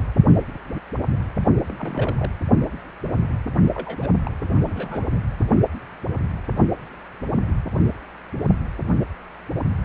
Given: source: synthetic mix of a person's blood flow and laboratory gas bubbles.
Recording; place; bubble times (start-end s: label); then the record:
Doppler ultrasound of blood flow; precordium
1.67-2.31 s: bubbles
3.75-4.09 s: bubbles
4.25-4.31 s: bubbles
4.43-4.47 s: bubbles
4.62-5.19 s: bubbles
From the record:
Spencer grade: 2 (many but less than half of the cardiac periods contain bubble signals, singularly or in groups); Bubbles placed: only in the low amplitude regions of the cardiac cycle